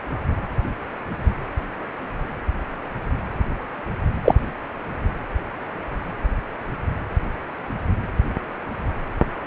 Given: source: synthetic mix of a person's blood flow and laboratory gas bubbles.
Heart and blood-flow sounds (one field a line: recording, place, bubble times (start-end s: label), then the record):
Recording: Doppler ultrasound of blood flow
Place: precordium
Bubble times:
4.24-4.34 s: bubbles
From the record:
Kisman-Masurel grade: 113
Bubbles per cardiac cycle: 1 to 2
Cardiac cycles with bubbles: 1 to 10%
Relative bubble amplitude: loud (0.450 to 0.775)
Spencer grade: 1 (occasional bubble signal discernible with the cardiac motion signal, with majority of cardiac periods free of bubbles)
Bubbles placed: anywhere in the cardiac cycle